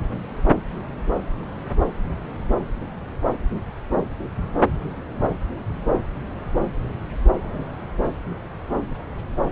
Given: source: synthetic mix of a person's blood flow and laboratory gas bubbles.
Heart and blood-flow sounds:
Doppler ultrasound of blood flow; subclavian vein
no bubbles
From the record:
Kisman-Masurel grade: 000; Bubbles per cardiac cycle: 0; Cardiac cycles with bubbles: 0%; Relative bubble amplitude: no bubbles discernible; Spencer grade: 0 (complete lack of bubble signals)

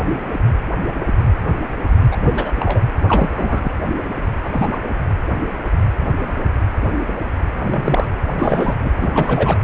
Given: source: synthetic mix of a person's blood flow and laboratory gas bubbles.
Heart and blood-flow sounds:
Doppler ultrasound of blood flow; precordium
2.11-2.16 s: bubbles
2.21-2.54 s: bubbles
2.60-2.81 s: bubbles
3.08-3.30 s: bubbles
3.35-3.69 s: bubbles
4.44-4.67 s: bubbles
4.71-4.80 s: bubbles
7.58-8.10 s: bubbles
8.37-8.75 s: bubbles
8.81-8.93 s: bubbles
8.99-9.56 s: bubbles
From the record:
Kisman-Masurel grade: 222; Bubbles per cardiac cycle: several, 3 to 8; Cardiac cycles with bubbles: 10 to 50%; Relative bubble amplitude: moderate (0.250 to 0.450); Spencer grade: 2 (many but less than half of the cardiac periods contain bubble signals, singularly or in groups); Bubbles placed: anywhere in the cardiac cycle

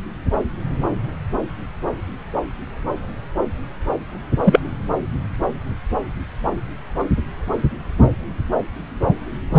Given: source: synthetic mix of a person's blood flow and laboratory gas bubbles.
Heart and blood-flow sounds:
Doppler ultrasound of blood flow; subclavian vein
4.44-4.60 s: bubbles
9.52-9.59 s: bubbles
From the record:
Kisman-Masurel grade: 113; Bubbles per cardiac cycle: 1 to 2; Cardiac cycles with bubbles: 1 to 10%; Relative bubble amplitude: loud (0.450 to 0.775); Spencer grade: 1 (occasional bubble signal discernible with the cardiac motion signal, with majority of cardiac periods free of bubbles); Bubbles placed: anywhere in the cardiac cycle

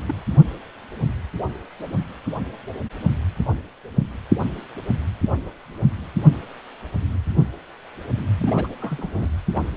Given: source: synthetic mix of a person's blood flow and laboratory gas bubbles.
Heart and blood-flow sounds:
Doppler ultrasound of blood flow; precordium
0.05-0.14 s: bubbles
8.38-8.67 s: bubbles
8.80-9.29 s: bubbles
9.55-9.60 s: bubbles
From the record:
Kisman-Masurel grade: 221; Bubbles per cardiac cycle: several, 3 to 8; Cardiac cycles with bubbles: 10 to 50%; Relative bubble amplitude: barely perceptible (0.100 to 0.250); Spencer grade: 2 (many but less than half of the cardiac periods contain bubble signals, singularly or in groups); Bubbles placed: anywhere in the cardiac cycle

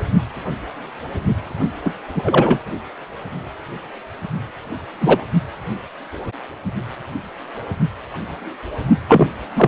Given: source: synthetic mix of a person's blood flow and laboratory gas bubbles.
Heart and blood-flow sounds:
Doppler ultrasound of blood flow; precordium
1.84-1.93 s: bubbles
2.15-2.60 s: bubbles
5.00-5.25 s: bubbles
9.08-9.29 s: bubbles
9.55-9.68 s: bubbles
From the record:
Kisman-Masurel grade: 223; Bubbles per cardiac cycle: several, 3 to 8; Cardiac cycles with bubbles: 10 to 50%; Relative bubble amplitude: loud (0.450 to 0.775); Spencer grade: 2 (many but less than half of the cardiac periods contain bubble signals, singularly or in groups); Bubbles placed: only in the low amplitude regions of the cardiac cycle

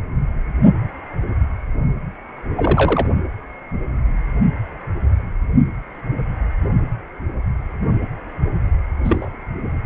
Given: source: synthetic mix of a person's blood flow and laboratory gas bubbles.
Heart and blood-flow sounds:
Doppler ultrasound of blood flow; precordium
2.56-3.07 s: bubbles
9.04-9.36 s: bubbles
From the record:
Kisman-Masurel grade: 122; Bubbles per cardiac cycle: 1 to 2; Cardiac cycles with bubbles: 10 to 50%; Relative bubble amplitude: moderate (0.250 to 0.450); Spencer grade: 2 (many but less than half of the cardiac periods contain bubble signals, singularly or in groups); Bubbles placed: only in the low amplitude regions of the cardiac cycle

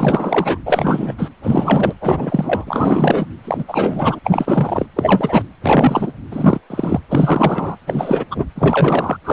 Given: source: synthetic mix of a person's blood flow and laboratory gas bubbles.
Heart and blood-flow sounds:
Doppler ultrasound of blood flow; precordium
0.00-0.58 s: bubbles
0.66-1.15 s: bubbles
1.18-1.31 s: bubbles
1.43-1.94 s: bubbles
2.00-3.26 s: bubbles
3.45-3.65 s: bubbles
3.68-4.20 s: bubbles
4.24-4.86 s: bubbles
4.96-5.43 s: bubbles
5.63-6.12 s: bubbles
6.31-6.59 s: bubbles
6.70-7.00 s: bubbles
7.09-7.76 s: bubbles
7.87-8.24 s: bubbles
8.30-8.46 s: bubbles
8.56-9.17 s: bubbles
9.24-9.33 s: bubbles
From the record:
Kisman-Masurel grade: 343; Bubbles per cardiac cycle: rolling drumbeat, 9 or more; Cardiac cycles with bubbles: 100%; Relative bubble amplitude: loud (0.450 to 0.775); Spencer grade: 3 (all of the cardiac periods contain showers or single bubble signals, but not dominating or overriding the cardiac motion signals); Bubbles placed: anywhere in the cardiac cycle

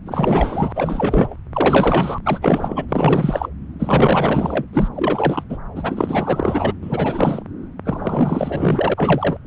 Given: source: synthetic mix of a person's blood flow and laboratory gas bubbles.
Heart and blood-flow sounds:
Doppler ultrasound of blood flow; subclavian vein
0.05-1.36 s: bubbles
1.52-2.19 s: bubbles
2.25-2.86 s: bubbles
2.89-3.49 s: bubbles
3.79-4.65 s: bubbles
4.73-4.88 s: bubbles
4.94-5.44 s: bubbles
5.49-5.58 s: bubbles
5.75-6.74 s: bubbles
6.82-7.42 s: bubbles
7.85-8.94 s: bubbles
8.97-9.37 s: bubbles
9.44-9.47 s: bubbles
From the record:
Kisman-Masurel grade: 444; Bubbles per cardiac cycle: continuous sound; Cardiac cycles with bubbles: 100%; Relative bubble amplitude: maximal (0.775 to 0.999); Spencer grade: 4 (maximum detectable bubble signal sounding continuously throughout systole and diastole of every cardiac period, and overriding the amplitude of the normal cardiac signals); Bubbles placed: anywhere in the cardiac cycle

